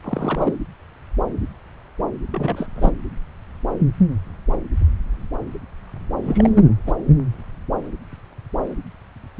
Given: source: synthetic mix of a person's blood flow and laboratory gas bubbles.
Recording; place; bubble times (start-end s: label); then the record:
Doppler ultrasound of blood flow; subclavian vein
0.04-0.58 s: bubbles
2.31-2.67 s: bubbles
2.75-2.92 s: bubbles
6.21-6.69 s: bubbles
6.87-6.93 s: bubbles
From the record:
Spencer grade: 2 (many but less than half of the cardiac periods contain bubble signals, singularly or in groups); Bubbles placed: anywhere in the cardiac cycle